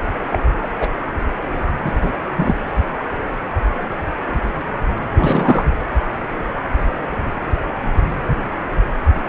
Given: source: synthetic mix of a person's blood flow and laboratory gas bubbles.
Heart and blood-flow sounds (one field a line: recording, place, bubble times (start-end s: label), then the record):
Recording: Doppler ultrasound of blood flow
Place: precordium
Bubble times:
0.32-0.39 s: bubbles
0.62-0.68 s: bubbles
0.80-0.90 s: bubbles
1.84-1.91 s: bubbles
2.01-2.11 s: bubbles
2.37-2.54 s: bubbles
5.14-5.65 s: bubbles
From the record:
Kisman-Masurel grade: 223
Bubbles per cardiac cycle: several, 3 to 8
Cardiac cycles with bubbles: 10 to 50%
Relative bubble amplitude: loud (0.450 to 0.775)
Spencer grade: 2 (many but less than half of the cardiac periods contain bubble signals, singularly or in groups)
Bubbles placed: anywhere in the cardiac cycle